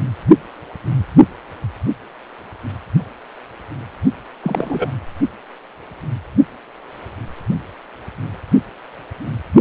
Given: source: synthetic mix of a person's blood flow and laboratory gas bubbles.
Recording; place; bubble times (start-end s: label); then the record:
Doppler ultrasound of blood flow; precordium
4.44-4.89 s: bubbles
From the record:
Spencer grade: 1 (occasional bubble signal discernible with the cardiac motion signal, with majority of cardiac periods free of bubbles); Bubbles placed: anywhere in the cardiac cycle